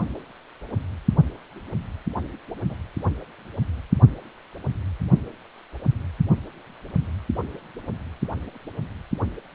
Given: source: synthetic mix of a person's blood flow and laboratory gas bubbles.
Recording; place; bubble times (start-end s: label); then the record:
Doppler ultrasound of blood flow; precordium
2.69-2.76 s: bubbles
From the record:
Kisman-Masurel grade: 111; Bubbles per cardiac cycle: 1 to 2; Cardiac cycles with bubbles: 1 to 10%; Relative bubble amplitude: barely perceptible (0.100 to 0.250); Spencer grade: 1 (occasional bubble signal discernible with the cardiac motion signal, with majority of cardiac periods free of bubbles); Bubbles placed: anywhere in the cardiac cycle